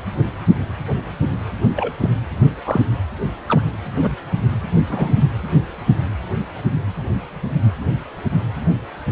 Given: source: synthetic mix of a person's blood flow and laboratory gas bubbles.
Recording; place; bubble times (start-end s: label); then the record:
Doppler ultrasound of blood flow; precordium
1.76-1.94 s: bubbles
2.00-2.10 s: bubbles
2.65-2.81 s: bubbles
3.48-3.62 s: bubbles
3.96-4.15 s: bubbles
4.89-5.15 s: bubbles
From the record:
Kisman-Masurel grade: 122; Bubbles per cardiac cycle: 1 to 2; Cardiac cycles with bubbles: 10 to 50%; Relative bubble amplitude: moderate (0.250 to 0.450); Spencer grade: 2 (many but less than half of the cardiac periods contain bubble signals, singularly or in groups); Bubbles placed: anywhere in the cardiac cycle